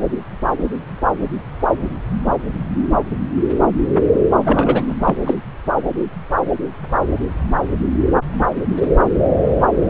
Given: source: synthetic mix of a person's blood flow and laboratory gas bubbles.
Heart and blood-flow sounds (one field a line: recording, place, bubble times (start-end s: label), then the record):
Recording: Doppler ultrasound of blood flow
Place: subclavian vein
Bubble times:
4.45-4.95 s: bubbles
5.03-5.15 s: bubbles
5.24-5.35 s: bubbles
From the record:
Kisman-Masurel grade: 213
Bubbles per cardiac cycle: several, 3 to 8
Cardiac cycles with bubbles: 1 to 10%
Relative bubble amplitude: loud (0.450 to 0.775)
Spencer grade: 1 (occasional bubble signal discernible with the cardiac motion signal, with majority of cardiac periods free of bubbles)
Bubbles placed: anywhere in the cardiac cycle